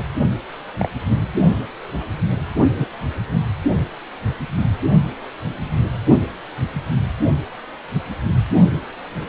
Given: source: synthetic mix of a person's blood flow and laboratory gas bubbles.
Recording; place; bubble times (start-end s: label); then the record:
Doppler ultrasound of blood flow; precordium
0.00-0.04 s: bubbles
0.79-0.88 s: bubbles
2.75-2.88 s: bubbles
From the record:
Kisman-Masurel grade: 122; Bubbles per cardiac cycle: 1 to 2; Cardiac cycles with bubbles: 10 to 50%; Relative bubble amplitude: moderate (0.250 to 0.450); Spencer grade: 2 (many but less than half of the cardiac periods contain bubble signals, singularly or in groups); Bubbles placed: only in the low amplitude regions of the cardiac cycle